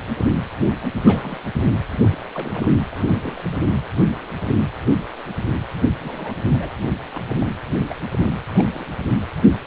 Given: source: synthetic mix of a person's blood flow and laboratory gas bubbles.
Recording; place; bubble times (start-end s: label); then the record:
Doppler ultrasound of blood flow; precordium
1.03-1.40 s: bubbles
1.57-1.72 s: bubbles
2.02-2.67 s: bubbles
2.91-3.57 s: bubbles
5.88-6.41 s: bubbles
6.59-6.72 s: bubbles
7.09-7.21 s: bubbles
7.26-7.34 s: bubbles
7.40-7.51 s: bubbles
7.79-7.86 s: bubbles
7.89-7.95 s: bubbles
8.19-8.33 s: bubbles
8.51-8.85 s: bubbles
From the record:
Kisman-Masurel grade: 221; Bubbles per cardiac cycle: several, 3 to 8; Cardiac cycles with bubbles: 10 to 50%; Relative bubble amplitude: barely perceptible (0.100 to 0.250); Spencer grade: 2 (many but less than half of the cardiac periods contain bubble signals, singularly or in groups); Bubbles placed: anywhere in the cardiac cycle